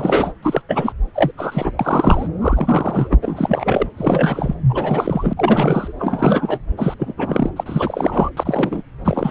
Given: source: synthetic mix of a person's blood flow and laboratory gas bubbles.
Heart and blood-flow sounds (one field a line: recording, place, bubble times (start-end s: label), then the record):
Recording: Doppler ultrasound of blood flow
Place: subclavian vein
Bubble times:
0.00-0.33 s: bubbles
0.42-0.61 s: bubbles
0.69-0.93 s: bubbles
1.14-1.31 s: bubbles
1.37-1.74 s: bubbles
1.79-2.28 s: bubbles
2.41-3.17 s: bubbles
3.22-3.87 s: bubbles
3.96-4.54 s: bubbles
4.69-5.33 s: bubbles
5.37-5.92 s: bubbles
5.99-6.58 s: bubbles
6.77-6.94 s: bubbles
6.99-7.14 s: bubbles
7.17-7.50 s: bubbles
7.56-8.30 s: bubbles
8.37-8.83 s: bubbles
9.04-9.31 s: bubbles
From the record:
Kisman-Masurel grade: 343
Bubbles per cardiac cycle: rolling drumbeat, 9 or more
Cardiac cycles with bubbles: 100%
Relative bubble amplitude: loud (0.450 to 0.775)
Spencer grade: 3 (all of the cardiac periods contain showers or single bubble signals, but not dominating or overriding the cardiac motion signals)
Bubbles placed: anywhere in the cardiac cycle